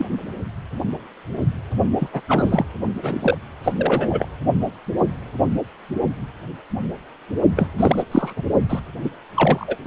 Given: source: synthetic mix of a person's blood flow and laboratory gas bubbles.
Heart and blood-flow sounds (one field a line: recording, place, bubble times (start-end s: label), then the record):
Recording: Doppler ultrasound of blood flow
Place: precordium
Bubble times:
0.00-0.05 s: bubbles
1.98-2.08 s: bubbles
2.12-2.21 s: bubbles
2.27-2.65 s: bubbles
3.02-3.38 s: bubbles
3.64-3.72 s: bubbles
3.77-4.29 s: bubbles
7.56-7.68 s: bubbles
7.78-8.04 s: bubbles
8.11-8.43 s: bubbles
8.69-8.79 s: bubbles
9.04-9.11 s: bubbles
9.35-9.77 s: bubbles
9.85-9.87 s: bubbles
From the record:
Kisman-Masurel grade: 332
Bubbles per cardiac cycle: rolling drumbeat, 9 or more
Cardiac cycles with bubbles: 50 to 99%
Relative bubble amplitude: moderate (0.250 to 0.450)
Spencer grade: 3 (all of the cardiac periods contain showers or single bubble signals, but not dominating or overriding the cardiac motion signals)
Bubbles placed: only in the low amplitude regions of the cardiac cycle